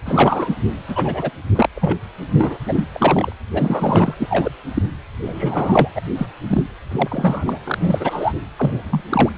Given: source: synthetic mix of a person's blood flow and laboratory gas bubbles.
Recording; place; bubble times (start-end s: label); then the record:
Doppler ultrasound of blood flow; precordium
0.05-0.55 s: bubbles
0.88-1.31 s: bubbles
1.55-1.69 s: bubbles
1.75-1.98 s: bubbles
2.38-2.58 s: bubbles
2.65-2.90 s: bubbles
2.92-3.32 s: bubbles
3.53-4.14 s: bubbles
4.18-4.51 s: bubbles
4.74-4.83 s: bubbles
5.23-5.89 s: bubbles
5.96-6.00 s: bubbles
6.18-6.27 s: bubbles
6.48-6.62 s: bubbles
6.91-7.58 s: bubbles
7.64-8.32 s: bubbles
8.56-9.01 s: bubbles
9.09-9.29 s: bubbles
From the record:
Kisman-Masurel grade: 242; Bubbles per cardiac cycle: several, 3 to 8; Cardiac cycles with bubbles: 100%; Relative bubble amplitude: moderate (0.250 to 0.450); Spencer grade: 3 (all of the cardiac periods contain showers or single bubble signals, but not dominating or overriding the cardiac motion signals); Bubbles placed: anywhere in the cardiac cycle